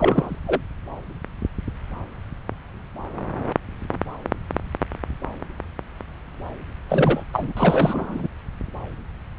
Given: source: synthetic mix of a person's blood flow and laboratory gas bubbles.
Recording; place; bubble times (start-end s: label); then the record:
Doppler ultrasound of blood flow; subclavian vein
0.00-0.39 s: bubbles
0.47-0.61 s: bubbles
6.89-7.24 s: bubbles
7.33-7.53 s: bubbles
7.57-8.28 s: bubbles
From the record:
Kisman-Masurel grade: 222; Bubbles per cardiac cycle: several, 3 to 8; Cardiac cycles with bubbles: 10 to 50%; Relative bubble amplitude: moderate (0.250 to 0.450); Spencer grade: 2 (many but less than half of the cardiac periods contain bubble signals, singularly or in groups); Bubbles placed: anywhere in the cardiac cycle